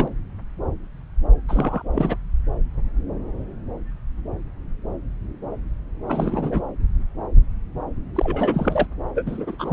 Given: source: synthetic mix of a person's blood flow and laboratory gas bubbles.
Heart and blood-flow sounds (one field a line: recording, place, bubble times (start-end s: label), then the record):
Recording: Doppler ultrasound of blood flow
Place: subclavian vein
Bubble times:
0.00-0.08 s: bubbles
1.48-1.82 s: bubbles
1.93-2.16 s: bubbles
6.08-6.62 s: bubbles
8.15-8.87 s: bubbles
9.15-9.55 s: bubbles
9.59-9.73 s: bubbles
From the record:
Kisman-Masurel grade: 222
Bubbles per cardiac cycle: several, 3 to 8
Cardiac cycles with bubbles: 10 to 50%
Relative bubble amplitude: moderate (0.250 to 0.450)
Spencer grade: 2 (many but less than half of the cardiac periods contain bubble signals, singularly or in groups)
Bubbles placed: anywhere in the cardiac cycle